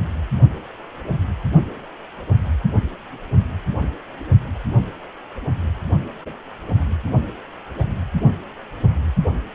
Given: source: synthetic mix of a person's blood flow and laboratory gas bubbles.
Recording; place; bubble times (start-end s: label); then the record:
Doppler ultrasound of blood flow; precordium
7.78-7.85 s: bubbles
From the record:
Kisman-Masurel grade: 111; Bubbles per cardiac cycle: 1 to 2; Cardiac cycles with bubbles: 1 to 10%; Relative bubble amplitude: barely perceptible (0.100 to 0.250); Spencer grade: 1 (occasional bubble signal discernible with the cardiac motion signal, with majority of cardiac periods free of bubbles); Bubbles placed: only in the low amplitude regions of the cardiac cycle